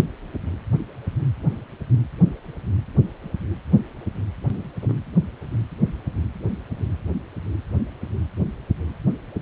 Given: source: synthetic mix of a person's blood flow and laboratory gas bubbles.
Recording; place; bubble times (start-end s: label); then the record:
Doppler ultrasound of blood flow; precordium
4.82-4.93 s: bubbles
From the record:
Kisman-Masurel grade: 111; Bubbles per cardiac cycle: 1 to 2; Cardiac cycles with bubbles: 1 to 10%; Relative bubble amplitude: barely perceptible (0.100 to 0.250); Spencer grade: 1 (occasional bubble signal discernible with the cardiac motion signal, with majority of cardiac periods free of bubbles); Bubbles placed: anywhere in the cardiac cycle